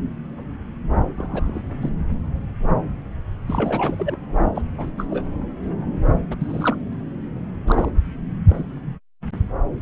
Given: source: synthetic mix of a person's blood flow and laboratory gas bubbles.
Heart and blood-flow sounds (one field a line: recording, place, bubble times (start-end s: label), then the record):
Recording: Doppler ultrasound of blood flow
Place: subclavian vein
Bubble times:
1.17-1.61 s: bubbles
1.81-1.90 s: bubbles
3.47-4.17 s: bubbles
4.54-4.62 s: bubbles
4.78-4.91 s: bubbles
4.98-5.07 s: bubbles
5.10-5.24 s: bubbles
6.31-6.37 s: bubbles
6.40-6.77 s: bubbles
7.67-7.91 s: bubbles
8.47-8.65 s: bubbles
From the record:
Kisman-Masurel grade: 222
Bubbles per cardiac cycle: several, 3 to 8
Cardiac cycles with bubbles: 10 to 50%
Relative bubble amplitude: moderate (0.250 to 0.450)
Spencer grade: 2 (many but less than half of the cardiac periods contain bubble signals, singularly or in groups)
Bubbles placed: anywhere in the cardiac cycle